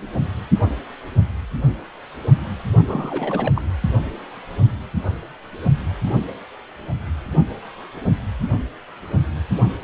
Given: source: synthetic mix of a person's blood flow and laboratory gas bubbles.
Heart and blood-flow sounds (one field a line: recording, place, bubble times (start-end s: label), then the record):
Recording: Doppler ultrasound of blood flow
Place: precordium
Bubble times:
2.83-3.52 s: bubbles
3.54-3.62 s: bubbles
From the record:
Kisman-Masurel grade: 212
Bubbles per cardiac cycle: several, 3 to 8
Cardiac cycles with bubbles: 1 to 10%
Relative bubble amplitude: moderate (0.250 to 0.450)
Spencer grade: 1 (occasional bubble signal discernible with the cardiac motion signal, with majority of cardiac periods free of bubbles)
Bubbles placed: anywhere in the cardiac cycle